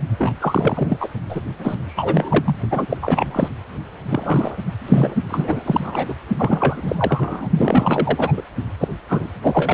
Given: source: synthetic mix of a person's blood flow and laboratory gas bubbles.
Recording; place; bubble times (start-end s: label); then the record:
Doppler ultrasound of blood flow; precordium
0.18-0.32 s: bubbles
0.40-1.08 s: bubbles
1.29-1.41 s: bubbles
1.59-2.55 s: bubbles
2.71-2.86 s: bubbles
2.89-2.97 s: bubbles
3.02-3.48 s: bubbles
4.09-4.57 s: bubbles
4.87-5.16 s: bubbles
5.29-6.14 s: bubbles
6.38-7.48 s: bubbles
7.56-8.33 s: bubbles
8.37-8.42 s: bubbles
8.79-8.88 s: bubbles
9.09-9.32 s: bubbles
9.42-9.74 s: bubbles
From the record:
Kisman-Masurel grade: 343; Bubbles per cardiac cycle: rolling drumbeat, 9 or more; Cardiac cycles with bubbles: 100%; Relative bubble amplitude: loud (0.450 to 0.775); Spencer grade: 3 (all of the cardiac periods contain showers or single bubble signals, but not dominating or overriding the cardiac motion signals); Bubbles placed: only in the low amplitude regions of the cardiac cycle